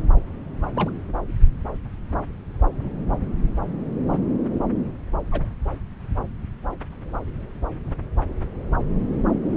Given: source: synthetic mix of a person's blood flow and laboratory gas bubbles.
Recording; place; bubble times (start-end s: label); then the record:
Doppler ultrasound of blood flow; subclavian vein
0.74-0.90 s: bubbles
4.10-4.17 s: bubbles
5.32-5.46 s: bubbles
From the record:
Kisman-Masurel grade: 121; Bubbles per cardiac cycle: 1 to 2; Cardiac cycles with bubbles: 10 to 50%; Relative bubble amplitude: barely perceptible (0.100 to 0.250); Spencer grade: 2 (many but less than half of the cardiac periods contain bubble signals, singularly or in groups); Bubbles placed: anywhere in the cardiac cycle